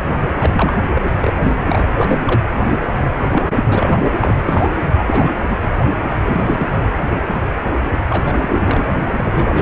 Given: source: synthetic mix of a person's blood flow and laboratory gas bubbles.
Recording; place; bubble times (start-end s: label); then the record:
Doppler ultrasound of blood flow; precordium
0.40-0.78 s: bubbles
0.93-1.01 s: bubbles
1.21-1.33 s: bubbles
1.38-1.54 s: bubbles
1.66-2.41 s: bubbles
2.96-3.25 s: bubbles
3.30-3.98 s: bubbles
4.02-4.36 s: bubbles
4.45-4.85 s: bubbles
4.94-5.33 s: bubbles
5.40-5.44 s: bubbles
5.47-5.56 s: bubbles
5.61-5.69 s: bubbles
6.06-6.19 s: bubbles
6.25-6.85 s: bubbles
7.02-7.08 s: bubbles
7.11-7.21 s: bubbles
8.09-8.84 s: bubbles
9.17-9.62 s: bubbles
From the record:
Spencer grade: 3 (all of the cardiac periods contain showers or single bubble signals, but not dominating or overriding the cardiac motion signals); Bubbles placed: anywhere in the cardiac cycle